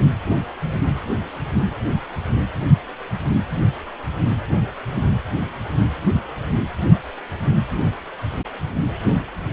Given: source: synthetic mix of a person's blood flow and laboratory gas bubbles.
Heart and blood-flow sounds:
Doppler ultrasound of blood flow; precordium
no bubbles
From the record:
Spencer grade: 0 (complete lack of bubble signals)

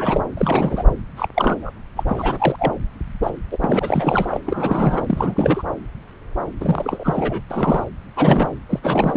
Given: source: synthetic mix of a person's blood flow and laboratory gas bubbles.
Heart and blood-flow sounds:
Doppler ultrasound of blood flow; subclavian vein
0.00-0.21 s: bubbles
0.37-0.84 s: bubbles
1.17-1.28 s: bubbles
1.34-1.71 s: bubbles
1.96-2.04 s: bubbles
2.08-2.56 s: bubbles
2.58-2.73 s: bubbles
3.23-3.31 s: bubbles
3.51-3.57 s: bubbles
3.61-4.39 s: bubbles
4.46-5.63 s: bubbles
6.60-7.41 s: bubbles
7.50-7.84 s: bubbles
8.15-8.58 s: bubbles
8.69-8.79 s: bubbles
8.82-9.17 s: bubbles
From the record:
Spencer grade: 3 (all of the cardiac periods contain showers or single bubble signals, but not dominating or overriding the cardiac motion signals); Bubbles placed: anywhere in the cardiac cycle

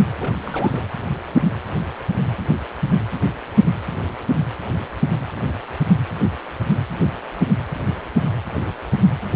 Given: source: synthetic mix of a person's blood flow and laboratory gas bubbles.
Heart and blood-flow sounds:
Doppler ultrasound of blood flow; precordium
0.19-0.84 s: bubbles
From the record:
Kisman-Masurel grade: 211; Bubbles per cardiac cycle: several, 3 to 8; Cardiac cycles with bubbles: 1 to 10%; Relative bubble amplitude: barely perceptible (0.100 to 0.250); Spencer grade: 1 (occasional bubble signal discernible with the cardiac motion signal, with majority of cardiac periods free of bubbles); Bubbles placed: anywhere in the cardiac cycle

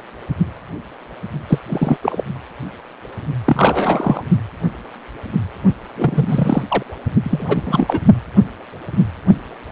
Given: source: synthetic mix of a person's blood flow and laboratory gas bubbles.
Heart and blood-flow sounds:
Doppler ultrasound of blood flow; precordium
1.48-1.59 s: bubbles
1.67-1.97 s: bubbles
2.03-2.23 s: bubbles
3.45-4.23 s: bubbles
5.96-6.63 s: bubbles
6.68-6.83 s: bubbles
7.24-7.99 s: bubbles
From the record:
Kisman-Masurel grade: 233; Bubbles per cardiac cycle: several, 3 to 8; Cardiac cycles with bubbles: 50 to 99%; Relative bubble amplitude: loud (0.450 to 0.775); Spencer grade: 3 (all of the cardiac periods contain showers or single bubble signals, but not dominating or overriding the cardiac motion signals); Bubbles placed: only in the low amplitude regions of the cardiac cycle

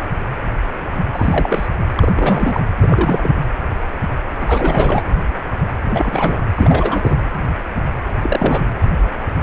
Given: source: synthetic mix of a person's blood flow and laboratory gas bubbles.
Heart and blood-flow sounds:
Doppler ultrasound of blood flow; precordium
1.13-1.69 s: bubbles
1.95-2.12 s: bubbles
2.15-2.60 s: bubbles
2.82-3.33 s: bubbles
4.41-5.02 s: bubbles
5.84-6.39 s: bubbles
6.54-7.16 s: bubbles
8.23-8.64 s: bubbles
From the record:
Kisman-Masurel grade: 332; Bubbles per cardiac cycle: rolling drumbeat, 9 or more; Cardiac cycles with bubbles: 50 to 99%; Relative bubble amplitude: moderate (0.250 to 0.450); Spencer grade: 3 (all of the cardiac periods contain showers or single bubble signals, but not dominating or overriding the cardiac motion signals); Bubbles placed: anywhere in the cardiac cycle

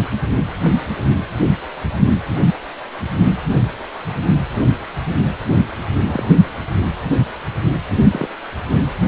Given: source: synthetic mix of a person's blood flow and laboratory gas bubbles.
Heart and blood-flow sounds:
Doppler ultrasound of blood flow; precordium
6.06-6.35 s: bubbles
8.12-8.27 s: bubbles
From the record:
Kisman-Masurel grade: 122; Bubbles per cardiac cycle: 1 to 2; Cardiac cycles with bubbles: 10 to 50%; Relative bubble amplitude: moderate (0.250 to 0.450); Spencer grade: 2 (many but less than half of the cardiac periods contain bubble signals, singularly or in groups); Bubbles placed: anywhere in the cardiac cycle

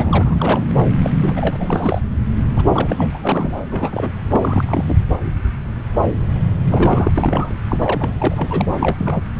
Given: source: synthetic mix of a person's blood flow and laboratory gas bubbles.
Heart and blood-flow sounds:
Doppler ultrasound of blood flow; subclavian vein
0.00-0.64 s: bubbles
1.02-1.10 s: bubbles
1.17-2.00 s: bubbles
2.56-3.10 s: bubbles
3.14-3.52 s: bubbles
3.70-4.12 s: bubbles
4.31-4.99 s: bubbles
6.67-7.12 s: bubbles
7.15-7.56 s: bubbles
7.68-8.14 s: bubbles
8.19-8.69 s: bubbles
8.79-9.23 s: bubbles
From the record:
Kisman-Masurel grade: 332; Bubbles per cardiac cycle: rolling drumbeat, 9 or more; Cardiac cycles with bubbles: 50 to 99%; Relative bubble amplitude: moderate (0.250 to 0.450); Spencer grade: 3 (all of the cardiac periods contain showers or single bubble signals, but not dominating or overriding the cardiac motion signals); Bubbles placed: anywhere in the cardiac cycle

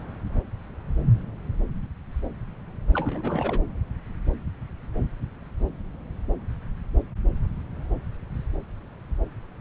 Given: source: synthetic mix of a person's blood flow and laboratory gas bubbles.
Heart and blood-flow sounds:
Doppler ultrasound of blood flow; subclavian vein
2.94-3.62 s: bubbles
From the record:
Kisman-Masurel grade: 211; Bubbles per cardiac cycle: several, 3 to 8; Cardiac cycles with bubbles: 1 to 10%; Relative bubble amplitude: barely perceptible (0.100 to 0.250); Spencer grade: 1 (occasional bubble signal discernible with the cardiac motion signal, with majority of cardiac periods free of bubbles); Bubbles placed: anywhere in the cardiac cycle

